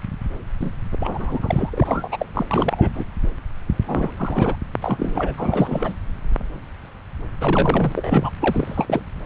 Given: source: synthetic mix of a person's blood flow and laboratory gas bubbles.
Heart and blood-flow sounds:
Doppler ultrasound of blood flow; subclavian vein
0.60-0.72 s: bubbles
0.92-1.70 s: bubbles
1.73-2.08 s: bubbles
2.12-2.25 s: bubbles
2.34-2.46 s: bubbles
2.51-2.92 s: bubbles
2.95-3.04 s: bubbles
3.87-4.12 s: bubbles
4.17-4.55 s: bubbles
4.81-5.35 s: bubbles
5.38-5.93 s: bubbles
7.40-7.92 s: bubbles
7.96-8.31 s: bubbles
8.41-9.03 s: bubbles
From the record:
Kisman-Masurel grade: 332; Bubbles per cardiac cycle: rolling drumbeat, 9 or more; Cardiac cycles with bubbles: 50 to 99%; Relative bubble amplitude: moderate (0.250 to 0.450); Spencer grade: 3 (all of the cardiac periods contain showers or single bubble signals, but not dominating or overriding the cardiac motion signals); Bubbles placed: anywhere in the cardiac cycle

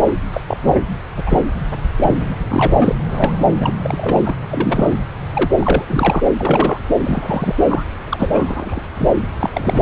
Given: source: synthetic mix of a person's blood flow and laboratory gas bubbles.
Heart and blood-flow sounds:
Doppler ultrasound of blood flow; subclavian vein
0.31-0.42 s: bubbles
0.48-0.58 s: bubbles
0.61-0.73 s: bubbles
1.16-1.23 s: bubbles
1.25-1.42 s: bubbles
1.96-2.36 s: bubbles
2.48-2.75 s: bubbles
2.77-2.95 s: bubbles
3.09-3.39 s: bubbles
3.60-3.73 s: bubbles
3.82-4.36 s: bubbles
4.46-4.93 s: bubbles
5.33-5.50 s: bubbles
5.59-5.84 s: bubbles
5.87-6.21 s: bubbles
6.37-6.81 s: bubbles
7.03-7.55 s: bubbles
7.66-7.84 s: bubbles
8.10-8.81 s: bubbles
8.95-9.11 s: bubbles
9.28-9.30 s: bubbles
9.40-9.50 s: bubbles
9.53-9.82 s: bubbles
From the record:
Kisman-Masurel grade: 242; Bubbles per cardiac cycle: several, 3 to 8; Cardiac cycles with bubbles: 100%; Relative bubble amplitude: moderate (0.250 to 0.450); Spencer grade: 3 (all of the cardiac periods contain showers or single bubble signals, but not dominating or overriding the cardiac motion signals); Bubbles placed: anywhere in the cardiac cycle

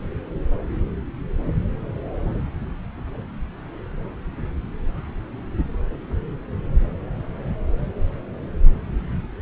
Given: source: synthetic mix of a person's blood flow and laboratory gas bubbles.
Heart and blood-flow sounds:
Doppler ultrasound of blood flow; subclavian vein
no bubbles
From the record:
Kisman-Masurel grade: 000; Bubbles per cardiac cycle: 0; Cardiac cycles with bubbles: 0%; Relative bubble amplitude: no bubbles discernible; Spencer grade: 0 (complete lack of bubble signals)

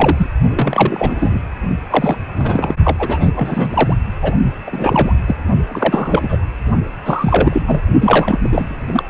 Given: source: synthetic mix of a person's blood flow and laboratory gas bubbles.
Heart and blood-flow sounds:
Doppler ultrasound of blood flow; precordium
0.00-0.27 s: bubbles
0.50-1.40 s: bubbles
1.90-2.16 s: bubbles
2.36-2.75 s: bubbles
2.83-3.31 s: bubbles
3.35-3.96 s: bubbles
4.21-4.33 s: bubbles
4.67-5.14 s: bubbles
5.27-5.36 s: bubbles
5.67-6.38 s: bubbles
7.04-7.62 s: bubbles
7.67-7.81 s: bubbles
8.01-8.39 s: bubbles
8.43-9.03 s: bubbles
From the record:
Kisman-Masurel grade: 343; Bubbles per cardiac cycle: rolling drumbeat, 9 or more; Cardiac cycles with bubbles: 100%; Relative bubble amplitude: loud (0.450 to 0.775); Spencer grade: 3 (all of the cardiac periods contain showers or single bubble signals, but not dominating or overriding the cardiac motion signals); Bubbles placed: only in the low amplitude regions of the cardiac cycle

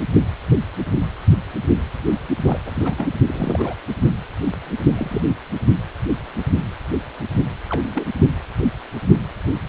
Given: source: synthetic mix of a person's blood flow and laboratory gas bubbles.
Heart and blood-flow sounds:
Doppler ultrasound of blood flow; precordium
2.46-2.60 s: bubbles
2.66-2.71 s: bubbles
2.74-2.94 s: bubbles
2.98-3.07 s: bubbles
3.26-3.74 s: bubbles
4.96-5.22 s: bubbles
7.69-8.04 s: bubbles
From the record:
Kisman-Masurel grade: 221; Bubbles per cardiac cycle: several, 3 to 8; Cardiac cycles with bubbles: 10 to 50%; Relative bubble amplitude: barely perceptible (0.100 to 0.250); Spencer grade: 2 (many but less than half of the cardiac periods contain bubble signals, singularly or in groups); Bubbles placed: only in the low amplitude regions of the cardiac cycle

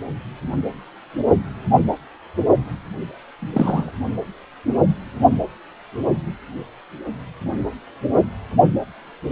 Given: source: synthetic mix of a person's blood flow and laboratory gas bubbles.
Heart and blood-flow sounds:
Doppler ultrasound of blood flow; precordium
3.39-3.92 s: bubbles
From the record:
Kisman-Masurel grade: 212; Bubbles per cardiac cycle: several, 3 to 8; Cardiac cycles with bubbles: 1 to 10%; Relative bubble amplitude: moderate (0.250 to 0.450); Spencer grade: 1 (occasional bubble signal discernible with the cardiac motion signal, with majority of cardiac periods free of bubbles); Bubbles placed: only in the low amplitude regions of the cardiac cycle

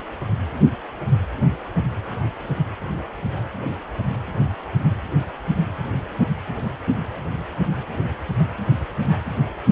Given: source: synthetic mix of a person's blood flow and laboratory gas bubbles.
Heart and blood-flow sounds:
Doppler ultrasound of blood flow; precordium
no bubbles
From the record:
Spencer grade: 0 (complete lack of bubble signals)

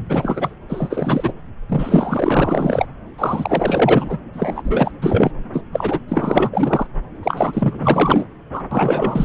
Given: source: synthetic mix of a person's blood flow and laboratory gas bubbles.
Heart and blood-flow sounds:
Doppler ultrasound of blood flow; subclavian vein
0.09-0.55 s: bubbles
0.69-1.32 s: bubbles
1.70-2.88 s: bubbles
3.18-4.17 s: bubbles
4.33-4.91 s: bubbles
5.01-5.31 s: bubbles
5.53-5.62 s: bubbles
5.73-6.00 s: bubbles
6.08-6.87 s: bubbles
7.23-8.26 s: bubbles
8.53-8.62 s: bubbles
8.71-9.25 s: bubbles
From the record:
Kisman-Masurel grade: 444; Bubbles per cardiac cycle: continuous sound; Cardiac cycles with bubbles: 100%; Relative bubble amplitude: maximal (0.775 to 0.999); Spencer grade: 4 (maximum detectable bubble signal sounding continuously throughout systole and diastole of every cardiac period, and overriding the amplitude of the normal cardiac signals); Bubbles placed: anywhere in the cardiac cycle

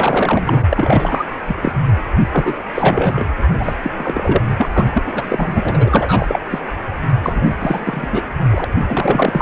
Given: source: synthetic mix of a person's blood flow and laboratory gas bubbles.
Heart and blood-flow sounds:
Doppler ultrasound of blood flow; precordium
0.00-0.65 s: bubbles
0.69-1.25 s: bubbles
1.48-1.56 s: bubbles
1.62-1.73 s: bubbles
2.31-2.54 s: bubbles
2.75-3.26 s: bubbles
3.59-3.73 s: bubbles
3.83-3.90 s: bubbles
3.97-4.42 s: bubbles
4.56-4.69 s: bubbles
4.72-4.86 s: bubbles
4.92-5.02 s: bubbles
5.05-6.39 s: bubbles
6.50-6.59 s: bubbles
7.22-7.54 s: bubbles
7.60-8.07 s: bubbles
8.11-8.23 s: bubbles
8.51-8.64 s: bubbles
8.87-9.41 s: bubbles
From the record:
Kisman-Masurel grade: 343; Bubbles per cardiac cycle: rolling drumbeat, 9 or more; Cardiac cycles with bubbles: 100%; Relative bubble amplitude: loud (0.450 to 0.775); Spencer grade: 3 (all of the cardiac periods contain showers or single bubble signals, but not dominating or overriding the cardiac motion signals); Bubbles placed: anywhere in the cardiac cycle

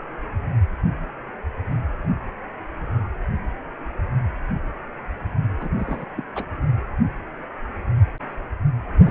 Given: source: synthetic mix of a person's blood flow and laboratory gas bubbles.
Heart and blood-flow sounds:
Doppler ultrasound of blood flow; precordium
5.60-5.69 s: bubbles
5.78-6.07 s: bubbles
6.16-6.24 s: bubbles
6.35-6.46 s: bubbles
9.04-9.11 s: bubbles
From the record:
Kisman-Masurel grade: 221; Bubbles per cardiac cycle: several, 3 to 8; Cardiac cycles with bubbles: 10 to 50%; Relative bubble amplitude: barely perceptible (0.100 to 0.250); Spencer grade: 2 (many but less than half of the cardiac periods contain bubble signals, singularly or in groups); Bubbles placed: anywhere in the cardiac cycle

